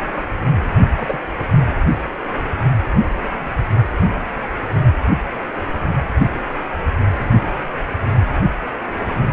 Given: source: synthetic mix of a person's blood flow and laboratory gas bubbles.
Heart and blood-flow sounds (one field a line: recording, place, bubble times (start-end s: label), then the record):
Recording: Doppler ultrasound of blood flow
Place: precordium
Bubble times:
0.97-1.20 s: bubbles
From the record:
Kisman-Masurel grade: 112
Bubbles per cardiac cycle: 1 to 2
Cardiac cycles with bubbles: 1 to 10%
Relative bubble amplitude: moderate (0.250 to 0.450)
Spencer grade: 1 (occasional bubble signal discernible with the cardiac motion signal, with majority of cardiac periods free of bubbles)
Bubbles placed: only in the low amplitude regions of the cardiac cycle